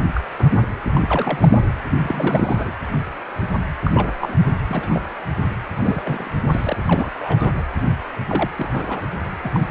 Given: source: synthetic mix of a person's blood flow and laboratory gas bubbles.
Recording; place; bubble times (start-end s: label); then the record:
Doppler ultrasound of blood flow; precordium
0.15-0.21 s: bubbles
0.38-0.59 s: bubbles
0.95-1.48 s: bubbles
1.51-1.59 s: bubbles
2.01-2.72 s: bubbles
3.85-3.90 s: bubbles
3.94-4.37 s: bubbles
4.68-5.02 s: bubbles
5.76-6.31 s: bubbles
6.50-6.75 s: bubbles
6.85-7.10 s: bubbles
7.17-7.66 s: bubbles
8.28-8.50 s: bubbles
8.57-9.02 s: bubbles
9.44-9.51 s: bubbles
9.54-9.60 s: bubbles
From the record:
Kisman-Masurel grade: 232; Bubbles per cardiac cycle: several, 3 to 8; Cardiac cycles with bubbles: 50 to 99%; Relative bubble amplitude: moderate (0.250 to 0.450); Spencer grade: 3 (all of the cardiac periods contain showers or single bubble signals, but not dominating or overriding the cardiac motion signals); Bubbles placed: anywhere in the cardiac cycle